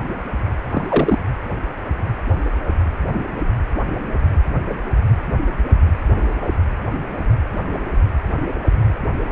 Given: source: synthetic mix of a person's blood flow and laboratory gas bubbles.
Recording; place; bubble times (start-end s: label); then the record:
Doppler ultrasound of blood flow; precordium
0.70-1.19 s: bubbles
From the record:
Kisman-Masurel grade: 212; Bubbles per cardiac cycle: several, 3 to 8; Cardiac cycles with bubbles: 1 to 10%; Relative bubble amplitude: moderate (0.250 to 0.450); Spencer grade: 1 (occasional bubble signal discernible with the cardiac motion signal, with majority of cardiac periods free of bubbles); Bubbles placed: anywhere in the cardiac cycle